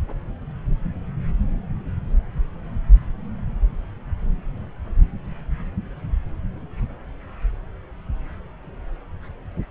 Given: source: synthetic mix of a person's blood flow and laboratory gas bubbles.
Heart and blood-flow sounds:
Doppler ultrasound of blood flow; subclavian vein
no bubbles
From the record:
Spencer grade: 0 (complete lack of bubble signals)

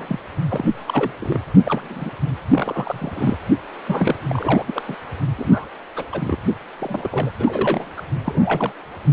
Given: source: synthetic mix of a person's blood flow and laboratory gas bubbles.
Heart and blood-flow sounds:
Doppler ultrasound of blood flow; precordium
0.00-0.20 s: bubbles
0.48-0.68 s: bubbles
0.88-1.12 s: bubbles
1.21-1.40 s: bubbles
1.65-2.10 s: bubbles
2.50-3.35 s: bubbles
3.86-4.15 s: bubbles
4.27-4.82 s: bubbles
4.88-4.96 s: bubbles
5.38-5.67 s: bubbles
5.96-6.05 s: bubbles
6.12-6.37 s: bubbles
6.78-7.30 s: bubbles
7.39-7.90 s: bubbles
7.97-8.02 s: bubbles
8.24-8.72 s: bubbles
From the record:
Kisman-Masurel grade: 242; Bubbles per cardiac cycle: several, 3 to 8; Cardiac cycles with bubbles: 100%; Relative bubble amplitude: moderate (0.250 to 0.450); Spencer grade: 3 (all of the cardiac periods contain showers or single bubble signals, but not dominating or overriding the cardiac motion signals); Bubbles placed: anywhere in the cardiac cycle

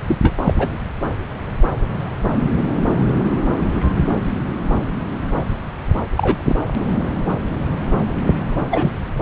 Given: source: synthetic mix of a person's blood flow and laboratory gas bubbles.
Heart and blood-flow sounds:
Doppler ultrasound of blood flow; subclavian vein
0.07-0.17 s: bubbles
0.21-0.34 s: bubbles
0.43-0.54 s: bubbles
0.56-0.77 s: bubbles
6.17-6.58 s: bubbles
8.70-8.91 s: bubbles
From the record:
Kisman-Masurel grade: 223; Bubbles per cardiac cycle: several, 3 to 8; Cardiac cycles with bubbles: 10 to 50%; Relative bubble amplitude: loud (0.450 to 0.775); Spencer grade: 2 (many but less than half of the cardiac periods contain bubble signals, singularly or in groups); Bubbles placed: anywhere in the cardiac cycle

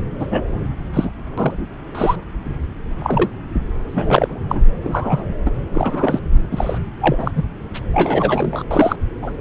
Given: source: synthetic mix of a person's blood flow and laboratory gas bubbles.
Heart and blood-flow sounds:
Doppler ultrasound of blood flow; subclavian vein
0.19-0.27 s: bubbles
0.30-0.42 s: bubbles
0.93-1.10 s: bubbles
1.38-1.66 s: bubbles
1.95-2.16 s: bubbles
3.00-3.29 s: bubbles
3.87-4.61 s: bubbles
4.83-5.26 s: bubbles
5.45-5.50 s: bubbles
5.72-6.19 s: bubbles
6.51-6.78 s: bubbles
7.01-7.31 s: bubbles
7.35-7.43 s: bubbles
7.73-7.80 s: bubbles
7.93-8.63 s: bubbles
8.71-8.96 s: bubbles
9.22-9.32 s: bubbles
From the record:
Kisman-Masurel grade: 233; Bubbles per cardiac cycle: several, 3 to 8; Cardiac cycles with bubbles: 50 to 99%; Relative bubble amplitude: loud (0.450 to 0.775); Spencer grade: 3 (all of the cardiac periods contain showers or single bubble signals, but not dominating or overriding the cardiac motion signals); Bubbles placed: anywhere in the cardiac cycle

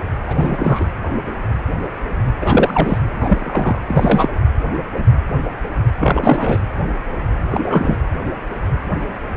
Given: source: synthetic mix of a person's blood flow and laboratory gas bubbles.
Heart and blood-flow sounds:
Doppler ultrasound of blood flow; precordium
0.27-0.84 s: bubbles
2.40-2.98 s: bubbles
3.21-3.78 s: bubbles
3.88-4.29 s: bubbles
5.99-6.58 s: bubbles
7.51-7.96 s: bubbles
From the record:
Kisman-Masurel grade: 223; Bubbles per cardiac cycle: several, 3 to 8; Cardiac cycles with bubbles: 10 to 50%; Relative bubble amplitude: loud (0.450 to 0.775); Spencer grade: 2 (many but less than half of the cardiac periods contain bubble signals, singularly or in groups); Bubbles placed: anywhere in the cardiac cycle

